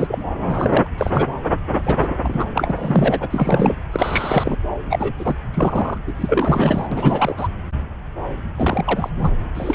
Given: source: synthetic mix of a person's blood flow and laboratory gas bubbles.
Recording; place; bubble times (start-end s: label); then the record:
Doppler ultrasound of blood flow; subclavian vein
0.00-0.23 s: bubbles
0.46-0.87 s: bubbles
0.97-1.27 s: bubbles
1.83-2.45 s: bubbles
2.55-3.75 s: bubbles
3.92-4.56 s: bubbles
4.89-5.12 s: bubbles
5.17-5.36 s: bubbles
5.54-5.97 s: bubbles
6.06-6.13 s: bubbles
6.16-6.87 s: bubbles
6.92-7.34 s: bubbles
7.37-7.48 s: bubbles
8.56-9.10 s: bubbles
9.18-9.31 s: bubbles
9.55-9.75 s: bubbles
From the record:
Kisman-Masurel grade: 333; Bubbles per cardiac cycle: rolling drumbeat, 9 or more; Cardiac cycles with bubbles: 50 to 99%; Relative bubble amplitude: loud (0.450 to 0.775); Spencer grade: 3 (all of the cardiac periods contain showers or single bubble signals, but not dominating or overriding the cardiac motion signals); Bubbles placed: anywhere in the cardiac cycle